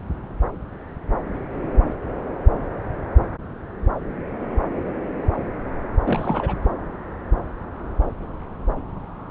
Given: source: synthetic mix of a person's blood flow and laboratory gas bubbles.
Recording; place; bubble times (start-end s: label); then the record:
Doppler ultrasound of blood flow; subclavian vein
6.00-6.54 s: bubbles
From the record:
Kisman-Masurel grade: 221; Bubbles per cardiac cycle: several, 3 to 8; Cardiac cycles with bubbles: 10 to 50%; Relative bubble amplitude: barely perceptible (0.100 to 0.250); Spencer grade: 2 (many but less than half of the cardiac periods contain bubble signals, singularly or in groups); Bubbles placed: anywhere in the cardiac cycle